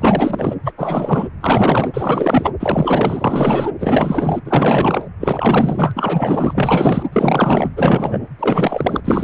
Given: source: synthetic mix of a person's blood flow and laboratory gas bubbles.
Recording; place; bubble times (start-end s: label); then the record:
Doppler ultrasound of blood flow; precordium
0.01-0.55 s: bubbles
0.64-0.72 s: bubbles
0.78-1.29 s: bubbles
1.41-1.90 s: bubbles
1.94-2.51 s: bubbles
2.60-3.71 s: bubbles
3.79-4.40 s: bubbles
4.45-5.08 s: bubbles
5.20-5.93 s: bubbles
5.96-7.03 s: bubbles
7.12-7.70 s: bubbles
7.76-8.26 s: bubbles
8.39-9.01 s: bubbles
9.04-9.24 s: bubbles
From the record:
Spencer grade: 4 (maximum detectable bubble signal sounding continuously throughout systole and diastole of every cardiac period, and overriding the amplitude of the normal cardiac signals); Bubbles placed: anywhere in the cardiac cycle